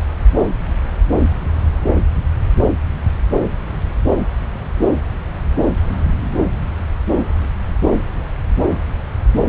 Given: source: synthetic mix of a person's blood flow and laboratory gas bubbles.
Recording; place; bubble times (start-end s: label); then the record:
Doppler ultrasound of blood flow; subclavian vein
no bubbles
From the record:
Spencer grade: 0 (complete lack of bubble signals)